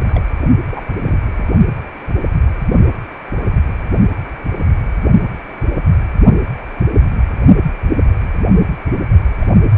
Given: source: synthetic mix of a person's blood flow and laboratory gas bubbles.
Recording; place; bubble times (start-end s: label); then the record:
Doppler ultrasound of blood flow; precordium
0.00-0.24 s: bubbles
0.69-0.93 s: bubbles
1.01-1.18 s: bubbles
1.21-1.30 s: bubbles
1.38-1.44 s: bubbles
9.40-9.45 s: bubbles
9.69-9.78 s: bubbles
From the record:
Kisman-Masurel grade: 221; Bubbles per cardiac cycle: several, 3 to 8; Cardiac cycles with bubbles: 10 to 50%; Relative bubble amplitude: barely perceptible (0.100 to 0.250); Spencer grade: 2 (many but less than half of the cardiac periods contain bubble signals, singularly or in groups); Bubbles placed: only in the low amplitude regions of the cardiac cycle